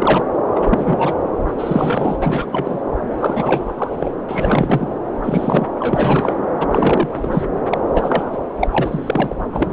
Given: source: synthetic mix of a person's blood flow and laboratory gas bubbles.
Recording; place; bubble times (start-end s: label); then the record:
Doppler ultrasound of blood flow; subclavian vein
0.00-0.28 s: bubbles
0.54-1.16 s: bubbles
1.58-2.17 s: bubbles
2.20-2.82 s: bubbles
3.17-3.96 s: bubbles
3.99-4.11 s: bubbles
4.28-4.89 s: bubbles
5.21-5.67 s: bubbles
5.79-6.37 s: bubbles
6.61-6.67 s: bubbles
6.71-7.43 s: bubbles
7.70-7.78 s: bubbles
7.94-8.38 s: bubbles
8.60-8.68 s: bubbles
8.71-9.35 s: bubbles
9.52-9.73 s: bubbles
From the record:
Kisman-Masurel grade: 333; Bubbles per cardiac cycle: rolling drumbeat, 9 or more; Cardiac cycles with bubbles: 50 to 99%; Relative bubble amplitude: loud (0.450 to 0.775); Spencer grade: 3 (all of the cardiac periods contain showers or single bubble signals, but not dominating or overriding the cardiac motion signals); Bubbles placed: anywhere in the cardiac cycle